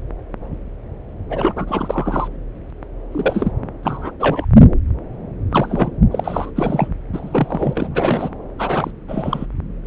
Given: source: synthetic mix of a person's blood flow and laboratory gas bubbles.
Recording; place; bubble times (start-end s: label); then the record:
Doppler ultrasound of blood flow; subclavian vein
1.30-2.28 s: bubbles
3.12-3.52 s: bubbles
3.83-4.11 s: bubbles
4.19-4.45 s: bubbles
5.51-5.91 s: bubbles
6.10-6.51 s: bubbles
6.55-6.88 s: bubbles
7.13-8.29 s: bubbles
8.59-8.91 s: bubbles
9.08-9.46 s: bubbles
9.84-9.87 s: bubbles
From the record:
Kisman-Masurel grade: 232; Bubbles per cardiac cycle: several, 3 to 8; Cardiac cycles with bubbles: 50 to 99%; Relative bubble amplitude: moderate (0.250 to 0.450); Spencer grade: 3 (all of the cardiac periods contain showers or single bubble signals, but not dominating or overriding the cardiac motion signals); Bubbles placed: anywhere in the cardiac cycle